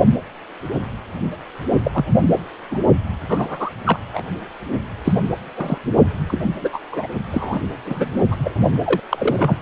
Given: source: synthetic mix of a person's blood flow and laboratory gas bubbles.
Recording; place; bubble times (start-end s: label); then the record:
Doppler ultrasound of blood flow; precordium
1.84-2.05 s: bubbles
2.71-2.78 s: bubbles
3.29-3.70 s: bubbles
3.84-3.99 s: bubbles
4.14-4.25 s: bubbles
5.04-5.13 s: bubbles
5.56-5.78 s: bubbles
6.28-6.40 s: bubbles
6.61-6.70 s: bubbles
6.73-6.79 s: bubbles
6.92-7.07 s: bubbles
7.32-7.61 s: bubbles
7.86-8.09 s: bubbles
8.31-8.54 s: bubbles
8.85-9.00 s: bubbles
9.11-9.56 s: bubbles
From the record:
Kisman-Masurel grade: 232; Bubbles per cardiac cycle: several, 3 to 8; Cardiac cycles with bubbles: 50 to 99%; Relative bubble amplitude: moderate (0.250 to 0.450); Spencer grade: 3 (all of the cardiac periods contain showers or single bubble signals, but not dominating or overriding the cardiac motion signals); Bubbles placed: only in the low amplitude regions of the cardiac cycle